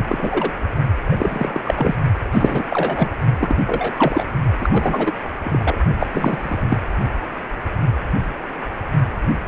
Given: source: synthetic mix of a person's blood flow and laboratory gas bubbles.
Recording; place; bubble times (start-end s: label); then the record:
Doppler ultrasound of blood flow; precordium
0.07-0.52 s: bubbles
1.10-1.60 s: bubbles
1.65-1.95 s: bubbles
2.32-2.63 s: bubbles
2.69-3.10 s: bubbles
3.40-3.59 s: bubbles
3.67-3.93 s: bubbles
3.96-4.25 s: bubbles
4.61-5.13 s: bubbles
5.44-5.78 s: bubbles
5.99-6.07 s: bubbles
6.12-6.78 s: bubbles
From the record:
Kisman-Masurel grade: 333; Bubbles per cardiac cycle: rolling drumbeat, 9 or more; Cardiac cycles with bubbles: 50 to 99%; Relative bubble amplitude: loud (0.450 to 0.775); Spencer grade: 3 (all of the cardiac periods contain showers or single bubble signals, but not dominating or overriding the cardiac motion signals); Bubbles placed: only in the low amplitude regions of the cardiac cycle